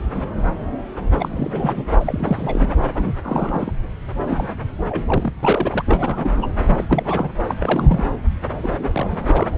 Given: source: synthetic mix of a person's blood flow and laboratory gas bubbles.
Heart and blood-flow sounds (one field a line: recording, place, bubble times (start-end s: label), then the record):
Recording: Doppler ultrasound of blood flow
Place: subclavian vein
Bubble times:
0.14-0.23 s: bubbles
1.12-1.83 s: bubbles
1.99-2.69 s: bubbles
2.94-3.15 s: bubbles
3.24-3.72 s: bubbles
4.23-4.47 s: bubbles
4.88-5.03 s: bubbles
5.06-5.31 s: bubbles
5.43-5.83 s: bubbles
5.88-6.47 s: bubbles
6.67-6.84 s: bubbles
6.89-7.30 s: bubbles
7.47-7.54 s: bubbles
7.59-8.12 s: bubbles
8.51-9.17 s: bubbles
9.27-9.50 s: bubbles
From the record:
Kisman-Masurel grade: 332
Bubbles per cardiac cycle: rolling drumbeat, 9 or more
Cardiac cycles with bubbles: 50 to 99%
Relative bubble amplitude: moderate (0.250 to 0.450)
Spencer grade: 3 (all of the cardiac periods contain showers or single bubble signals, but not dominating or overriding the cardiac motion signals)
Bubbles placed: anywhere in the cardiac cycle